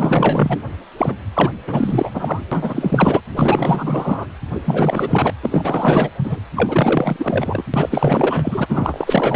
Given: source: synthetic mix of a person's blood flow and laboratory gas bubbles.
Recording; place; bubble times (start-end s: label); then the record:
Doppler ultrasound of blood flow; precordium
0.00-0.58 s: bubbles
0.97-1.17 s: bubbles
1.33-1.52 s: bubbles
1.67-2.41 s: bubbles
2.51-3.20 s: bubbles
3.34-4.26 s: bubbles
4.54-4.61 s: bubbles
4.65-5.33 s: bubbles
5.42-6.10 s: bubbles
6.24-6.41 s: bubbles
6.55-7.65 s: bubbles
7.74-8.66 s: bubbles
8.69-9.36 s: bubbles
From the record:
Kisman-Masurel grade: 444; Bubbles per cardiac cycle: continuous sound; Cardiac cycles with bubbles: 100%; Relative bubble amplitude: maximal (0.775 to 0.999); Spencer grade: 4 (maximum detectable bubble signal sounding continuously throughout systole and diastole of every cardiac period, and overriding the amplitude of the normal cardiac signals); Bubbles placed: anywhere in the cardiac cycle